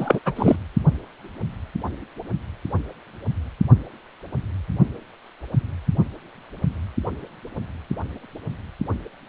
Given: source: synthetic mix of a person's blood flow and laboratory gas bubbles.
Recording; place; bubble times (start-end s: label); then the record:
Doppler ultrasound of blood flow; precordium
0.00-0.20 s: bubbles
0.25-0.33 s: bubbles
0.36-0.56 s: bubbles
From the record:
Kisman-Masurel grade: 213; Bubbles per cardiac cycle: several, 3 to 8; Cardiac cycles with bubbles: 1 to 10%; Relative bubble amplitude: loud (0.450 to 0.775); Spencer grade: 1 (occasional bubble signal discernible with the cardiac motion signal, with majority of cardiac periods free of bubbles); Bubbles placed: only in the low amplitude regions of the cardiac cycle